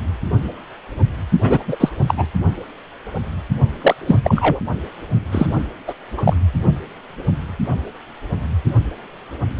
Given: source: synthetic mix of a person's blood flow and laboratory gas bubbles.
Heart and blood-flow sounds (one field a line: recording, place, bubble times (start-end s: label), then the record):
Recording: Doppler ultrasound of blood flow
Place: precordium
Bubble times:
1.41-1.63 s: bubbles
1.67-1.77 s: bubbles
1.80-1.89 s: bubbles
2.08-2.14 s: bubbles
2.17-2.27 s: bubbles
3.81-3.95 s: bubbles
4.06-4.21 s: bubbles
4.23-4.60 s: bubbles
5.31-5.46 s: bubbles
5.87-5.94 s: bubbles
6.17-6.22 s: bubbles
6.24-6.34 s: bubbles
From the record:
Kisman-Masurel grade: 223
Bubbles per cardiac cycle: several, 3 to 8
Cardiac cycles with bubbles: 10 to 50%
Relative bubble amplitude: loud (0.450 to 0.775)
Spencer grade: 2 (many but less than half of the cardiac periods contain bubble signals, singularly or in groups)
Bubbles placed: only in the low amplitude regions of the cardiac cycle